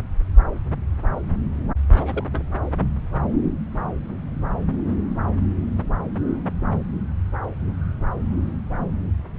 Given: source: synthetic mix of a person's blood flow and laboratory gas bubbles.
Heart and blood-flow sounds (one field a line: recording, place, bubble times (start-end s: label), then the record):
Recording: Doppler ultrasound of blood flow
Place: subclavian vein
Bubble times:
1.92-2.24 s: bubbles
2.31-2.51 s: bubbles
From the record:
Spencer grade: 1 (occasional bubble signal discernible with the cardiac motion signal, with majority of cardiac periods free of bubbles)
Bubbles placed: anywhere in the cardiac cycle